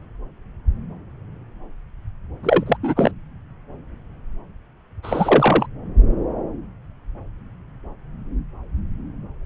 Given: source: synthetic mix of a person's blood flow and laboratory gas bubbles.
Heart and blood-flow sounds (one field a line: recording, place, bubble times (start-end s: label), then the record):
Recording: Doppler ultrasound of blood flow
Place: subclavian vein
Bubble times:
2.43-2.63 s: bubbles
2.66-2.77 s: bubbles
2.83-3.12 s: bubbles
5.03-5.67 s: bubbles
From the record:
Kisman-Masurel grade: 223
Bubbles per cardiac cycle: several, 3 to 8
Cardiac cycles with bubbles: 10 to 50%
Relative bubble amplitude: loud (0.450 to 0.775)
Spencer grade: 2 (many but less than half of the cardiac periods contain bubble signals, singularly or in groups)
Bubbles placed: anywhere in the cardiac cycle